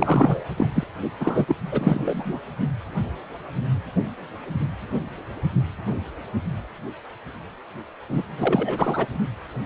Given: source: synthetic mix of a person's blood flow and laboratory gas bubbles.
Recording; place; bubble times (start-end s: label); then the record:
Doppler ultrasound of blood flow; precordium
0.00-0.40 s: bubbles
0.56-0.67 s: bubbles
0.74-0.83 s: bubbles
1.20-1.45 s: bubbles
1.48-1.56 s: bubbles
1.72-2.39 s: bubbles
8.09-8.22 s: bubbles
8.38-9.06 s: bubbles
From the record:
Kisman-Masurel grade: 332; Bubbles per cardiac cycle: rolling drumbeat, 9 or more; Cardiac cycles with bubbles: 50 to 99%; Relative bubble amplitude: moderate (0.250 to 0.450); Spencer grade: 3 (all of the cardiac periods contain showers or single bubble signals, but not dominating or overriding the cardiac motion signals); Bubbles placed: only in the low amplitude regions of the cardiac cycle